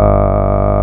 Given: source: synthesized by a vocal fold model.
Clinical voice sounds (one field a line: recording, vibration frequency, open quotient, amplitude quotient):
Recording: sustained vowel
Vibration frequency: 50 Hz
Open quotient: 0.5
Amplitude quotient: 1.1